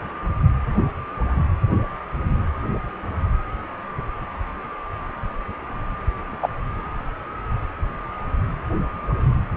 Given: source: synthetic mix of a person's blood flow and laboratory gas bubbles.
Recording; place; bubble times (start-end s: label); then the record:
Doppler ultrasound of blood flow; precordium
6.42-6.48 s: bubbles
From the record:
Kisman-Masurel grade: 113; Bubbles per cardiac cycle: 1 to 2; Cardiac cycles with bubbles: 1 to 10%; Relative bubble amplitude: loud (0.450 to 0.775); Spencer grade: 1 (occasional bubble signal discernible with the cardiac motion signal, with majority of cardiac periods free of bubbles); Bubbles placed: anywhere in the cardiac cycle